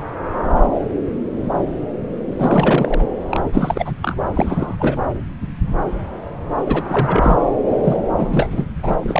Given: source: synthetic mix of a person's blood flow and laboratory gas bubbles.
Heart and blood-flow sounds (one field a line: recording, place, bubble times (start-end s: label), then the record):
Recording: Doppler ultrasound of blood flow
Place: subclavian vein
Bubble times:
2.37-3.06 s: bubbles
3.28-3.44 s: bubbles
3.52-3.92 s: bubbles
4.02-4.17 s: bubbles
4.33-4.75 s: bubbles
4.79-5.02 s: bubbles
6.64-6.83 s: bubbles
6.89-7.37 s: bubbles
7.83-7.96 s: bubbles
8.17-8.68 s: bubbles
8.83-9.20 s: bubbles
From the record:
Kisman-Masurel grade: 332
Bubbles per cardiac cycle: rolling drumbeat, 9 or more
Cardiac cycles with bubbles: 50 to 99%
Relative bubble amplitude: moderate (0.250 to 0.450)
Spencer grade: 3 (all of the cardiac periods contain showers or single bubble signals, but not dominating or overriding the cardiac motion signals)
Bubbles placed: anywhere in the cardiac cycle